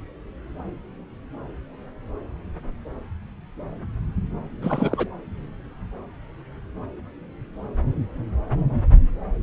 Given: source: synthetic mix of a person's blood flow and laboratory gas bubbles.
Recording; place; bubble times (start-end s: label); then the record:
Doppler ultrasound of blood flow; subclavian vein
4.62-5.08 s: bubbles
From the record:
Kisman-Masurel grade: 212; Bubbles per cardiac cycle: several, 3 to 8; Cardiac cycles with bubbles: 1 to 10%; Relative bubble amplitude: moderate (0.250 to 0.450); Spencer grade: 1 (occasional bubble signal discernible with the cardiac motion signal, with majority of cardiac periods free of bubbles); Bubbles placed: anywhere in the cardiac cycle